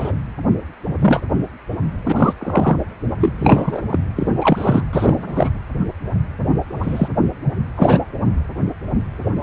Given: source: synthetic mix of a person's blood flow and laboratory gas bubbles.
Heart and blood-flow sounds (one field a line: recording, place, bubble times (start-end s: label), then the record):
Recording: Doppler ultrasound of blood flow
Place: precordium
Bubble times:
0.00-0.14 s: bubbles
0.99-1.20 s: bubbles
2.03-2.33 s: bubbles
2.40-2.77 s: bubbles
3.21-3.34 s: bubbles
3.38-3.81 s: bubbles
3.89-3.99 s: bubbles
4.15-4.31 s: bubbles
4.42-4.84 s: bubbles
4.93-5.50 s: bubbles
6.80-7.08 s: bubbles
7.76-7.99 s: bubbles
9.40-9.43 s: bubbles
From the record:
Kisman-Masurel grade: 233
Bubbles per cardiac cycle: several, 3 to 8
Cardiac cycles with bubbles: 50 to 99%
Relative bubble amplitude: loud (0.450 to 0.775)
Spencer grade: 3 (all of the cardiac periods contain showers or single bubble signals, but not dominating or overriding the cardiac motion signals)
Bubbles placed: anywhere in the cardiac cycle